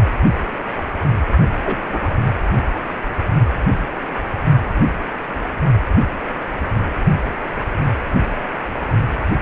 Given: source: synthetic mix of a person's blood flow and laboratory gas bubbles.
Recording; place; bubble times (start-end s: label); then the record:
Doppler ultrasound of blood flow; precordium
1.65-1.78 s: bubbles
1.90-2.15 s: bubbles
From the record:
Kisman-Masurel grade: 113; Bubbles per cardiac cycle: 1 to 2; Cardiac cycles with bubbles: 1 to 10%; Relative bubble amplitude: loud (0.450 to 0.775); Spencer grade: 1 (occasional bubble signal discernible with the cardiac motion signal, with majority of cardiac periods free of bubbles); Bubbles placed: only in the low amplitude regions of the cardiac cycle